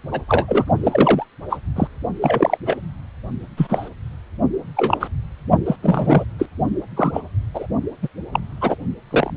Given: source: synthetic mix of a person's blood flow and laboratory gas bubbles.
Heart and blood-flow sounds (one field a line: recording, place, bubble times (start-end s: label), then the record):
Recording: Doppler ultrasound of blood flow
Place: precordium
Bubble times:
0.12-0.21 s: bubbles
0.28-0.65 s: bubbles
0.83-1.25 s: bubbles
1.49-1.59 s: bubbles
1.75-1.88 s: bubbles
2.22-2.57 s: bubbles
2.66-2.77 s: bubbles
3.56-3.90 s: bubbles
4.76-5.08 s: bubbles
5.65-5.76 s: bubbles
5.82-6.24 s: bubbles
6.38-6.48 s: bubbles
6.96-7.21 s: bubbles
7.53-7.67 s: bubbles
8.02-8.08 s: bubbles
8.33-8.40 s: bubbles
8.61-8.76 s: bubbles
9.11-9.30 s: bubbles
From the record:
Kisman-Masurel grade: 243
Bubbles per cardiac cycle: several, 3 to 8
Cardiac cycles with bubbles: 100%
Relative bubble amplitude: loud (0.450 to 0.775)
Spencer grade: 3 (all of the cardiac periods contain showers or single bubble signals, but not dominating or overriding the cardiac motion signals)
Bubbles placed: only in the low amplitude regions of the cardiac cycle